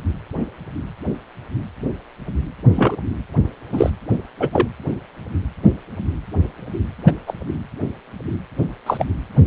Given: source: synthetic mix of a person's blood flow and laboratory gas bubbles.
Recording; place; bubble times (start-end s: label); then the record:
Doppler ultrasound of blood flow; precordium
2.74-2.96 s: bubbles
3.72-3.90 s: bubbles
4.40-4.48 s: bubbles
4.52-4.68 s: bubbles
7.06-7.12 s: bubbles
7.26-7.34 s: bubbles
8.86-9.05 s: bubbles
From the record:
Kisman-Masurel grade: 123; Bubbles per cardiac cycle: 1 to 2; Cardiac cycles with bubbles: 10 to 50%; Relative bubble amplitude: loud (0.450 to 0.775); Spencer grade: 2 (many but less than half of the cardiac periods contain bubble signals, singularly or in groups); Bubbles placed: anywhere in the cardiac cycle